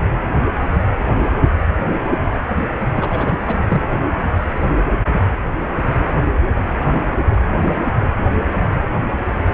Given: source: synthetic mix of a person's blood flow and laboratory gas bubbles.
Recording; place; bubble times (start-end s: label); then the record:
Doppler ultrasound of blood flow; precordium
2.96-3.37 s: bubbles
3.46-3.58 s: bubbles
3.68-3.82 s: bubbles
From the record:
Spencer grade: 1 (occasional bubble signal discernible with the cardiac motion signal, with majority of cardiac periods free of bubbles); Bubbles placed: anywhere in the cardiac cycle